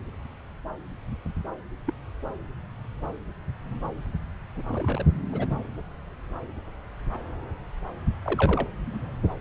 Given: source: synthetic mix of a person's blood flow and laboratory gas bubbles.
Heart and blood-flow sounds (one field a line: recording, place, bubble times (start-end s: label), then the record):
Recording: Doppler ultrasound of blood flow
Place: subclavian vein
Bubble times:
1.87-1.92 s: bubbles
4.55-4.63 s: bubbles
4.70-5.05 s: bubbles
5.32-5.46 s: bubbles
5.50-5.55 s: bubbles
8.26-8.68 s: bubbles
8.86-9.01 s: bubbles
From the record:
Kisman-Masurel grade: 121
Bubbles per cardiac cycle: 1 to 2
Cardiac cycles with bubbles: 10 to 50%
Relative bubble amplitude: barely perceptible (0.100 to 0.250)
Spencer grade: 2 (many but less than half of the cardiac periods contain bubble signals, singularly or in groups)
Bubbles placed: anywhere in the cardiac cycle